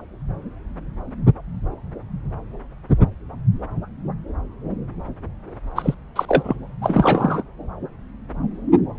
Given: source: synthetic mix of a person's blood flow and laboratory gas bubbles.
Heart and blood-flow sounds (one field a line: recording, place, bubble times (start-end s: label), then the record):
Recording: Doppler ultrasound of blood flow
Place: subclavian vein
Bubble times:
5.75-5.94 s: bubbles
6.15-6.25 s: bubbles
6.28-6.56 s: bubbles
6.81-7.42 s: bubbles
From the record:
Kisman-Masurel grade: 223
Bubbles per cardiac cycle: several, 3 to 8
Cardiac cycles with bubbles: 10 to 50%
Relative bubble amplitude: loud (0.450 to 0.775)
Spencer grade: 2 (many but less than half of the cardiac periods contain bubble signals, singularly or in groups)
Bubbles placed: anywhere in the cardiac cycle